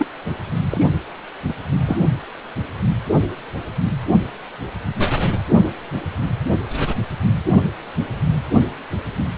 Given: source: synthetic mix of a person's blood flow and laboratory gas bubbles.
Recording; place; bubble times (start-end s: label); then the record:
Doppler ultrasound of blood flow; precordium
0.00-0.07 s: bubbles
0.71-0.85 s: bubbles
1.47-1.53 s: bubbles
1.86-1.97 s: bubbles
From the record:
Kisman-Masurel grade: 122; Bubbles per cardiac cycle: 1 to 2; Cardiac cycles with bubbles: 10 to 50%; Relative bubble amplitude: moderate (0.250 to 0.450); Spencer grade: 2 (many but less than half of the cardiac periods contain bubble signals, singularly or in groups); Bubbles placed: anywhere in the cardiac cycle